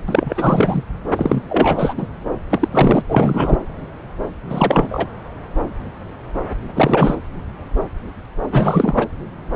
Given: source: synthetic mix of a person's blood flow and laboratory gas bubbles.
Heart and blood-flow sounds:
Doppler ultrasound of blood flow; subclavian vein
0.08-0.83 s: bubbles
1.16-1.43 s: bubbles
1.49-1.94 s: bubbles
1.98-2.08 s: bubbles
2.50-2.68 s: bubbles
2.71-3.02 s: bubbles
3.08-3.59 s: bubbles
4.49-5.08 s: bubbles
6.76-7.15 s: bubbles
8.51-9.07 s: bubbles
From the record:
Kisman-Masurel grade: 333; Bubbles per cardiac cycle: rolling drumbeat, 9 or more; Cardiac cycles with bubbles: 50 to 99%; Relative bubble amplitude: loud (0.450 to 0.775); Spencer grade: 3 (all of the cardiac periods contain showers or single bubble signals, but not dominating or overriding the cardiac motion signals); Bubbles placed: anywhere in the cardiac cycle

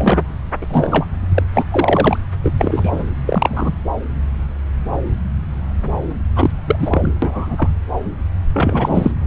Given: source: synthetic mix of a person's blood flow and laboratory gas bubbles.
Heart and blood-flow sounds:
Doppler ultrasound of blood flow; subclavian vein
0.00-0.22 s: bubbles
0.62-1.06 s: bubbles
1.34-1.43 s: bubbles
1.54-1.65 s: bubbles
1.71-2.17 s: bubbles
2.43-2.51 s: bubbles
2.58-3.03 s: bubbles
3.26-3.76 s: bubbles
6.35-6.51 s: bubbles
6.67-6.76 s: bubbles
6.79-7.12 s: bubbles
7.22-7.69 s: bubbles
8.53-9.12 s: bubbles
From the record:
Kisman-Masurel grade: 233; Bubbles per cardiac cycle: several, 3 to 8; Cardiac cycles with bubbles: 50 to 99%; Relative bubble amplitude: loud (0.450 to 0.775); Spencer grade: 3 (all of the cardiac periods contain showers or single bubble signals, but not dominating or overriding the cardiac motion signals); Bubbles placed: anywhere in the cardiac cycle

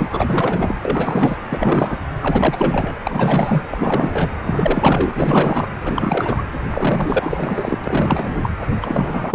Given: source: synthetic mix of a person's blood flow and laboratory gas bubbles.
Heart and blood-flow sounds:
Doppler ultrasound of blood flow; precordium
0.00-0.79 s: bubbles
0.85-1.38 s: bubbles
1.50-1.98 s: bubbles
2.21-2.96 s: bubbles
3.04-3.65 s: bubbles
3.70-4.29 s: bubbles
4.43-5.68 s: bubbles
5.79-6.42 s: bubbles
6.70-7.78 s: bubbles
7.84-8.52 s: bubbles
8.79-9.35 s: bubbles
From the record:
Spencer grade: 4 (maximum detectable bubble signal sounding continuously throughout systole and diastole of every cardiac period, and overriding the amplitude of the normal cardiac signals); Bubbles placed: anywhere in the cardiac cycle

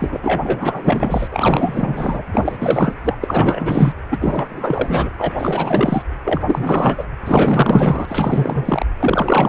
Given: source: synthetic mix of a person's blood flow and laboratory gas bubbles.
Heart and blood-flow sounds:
Doppler ultrasound of blood flow; precordium
0.00-0.18 s: bubbles
0.22-1.28 s: bubbles
1.32-2.22 s: bubbles
2.33-2.57 s: bubbles
2.59-2.94 s: bubbles
3.04-3.17 s: bubbles
3.21-3.93 s: bubbles
4.11-5.09 s: bubbles
5.17-5.32 s: bubbles
5.38-6.02 s: bubbles
6.25-6.42 s: bubbles
6.47-7.04 s: bubbles
7.25-8.86 s: bubbles
9.00-9.49 s: bubbles
From the record:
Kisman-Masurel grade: 444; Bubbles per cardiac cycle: continuous sound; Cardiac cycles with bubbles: 100%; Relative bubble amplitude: maximal (0.775 to 0.999); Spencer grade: 4 (maximum detectable bubble signal sounding continuously throughout systole and diastole of every cardiac period, and overriding the amplitude of the normal cardiac signals); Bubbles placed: anywhere in the cardiac cycle

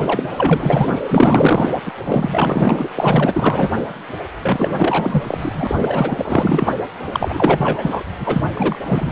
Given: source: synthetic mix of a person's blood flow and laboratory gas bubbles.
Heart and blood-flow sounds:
Doppler ultrasound of blood flow; precordium
0.00-0.99 s: bubbles
1.06-1.71 s: bubbles
1.85-1.92 s: bubbles
2.02-2.89 s: bubbles
2.96-3.72 s: bubbles
4.42-5.75 s: bubbles
5.79-6.74 s: bubbles
7.07-8.03 s: bubbles
8.19-8.41 s: bubbles
8.53-8.78 s: bubbles
8.83-9.12 s: bubbles
From the record:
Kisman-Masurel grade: 444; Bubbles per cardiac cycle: continuous sound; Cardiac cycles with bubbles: 100%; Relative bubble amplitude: maximal (0.775 to 0.999); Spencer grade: 4 (maximum detectable bubble signal sounding continuously throughout systole and diastole of every cardiac period, and overriding the amplitude of the normal cardiac signals); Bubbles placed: anywhere in the cardiac cycle

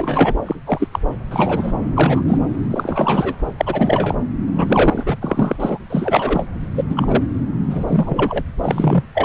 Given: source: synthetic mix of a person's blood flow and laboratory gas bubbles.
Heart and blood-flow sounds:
Doppler ultrasound of blood flow; subclavian vein
0.00-0.37 s: bubbles
0.46-0.55 s: bubbles
0.66-0.88 s: bubbles
0.93-0.99 s: bubbles
1.30-1.72 s: bubbles
1.95-2.25 s: bubbles
2.28-2.38 s: bubbles
2.71-3.35 s: bubbles
3.58-4.15 s: bubbles
4.56-5.18 s: bubbles
5.21-5.56 s: bubbles
5.59-5.78 s: bubbles
5.90-6.44 s: bubbles
6.75-6.83 s: bubbles
6.89-7.22 s: bubbles
7.70-7.84 s: bubbles
7.87-8.43 s: bubbles
8.62-9.03 s: bubbles
9.14-9.25 s: bubbles
From the record:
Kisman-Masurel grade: 243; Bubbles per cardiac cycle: several, 3 to 8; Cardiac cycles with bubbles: 100%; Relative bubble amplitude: loud (0.450 to 0.775); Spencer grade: 3 (all of the cardiac periods contain showers or single bubble signals, but not dominating or overriding the cardiac motion signals); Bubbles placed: anywhere in the cardiac cycle

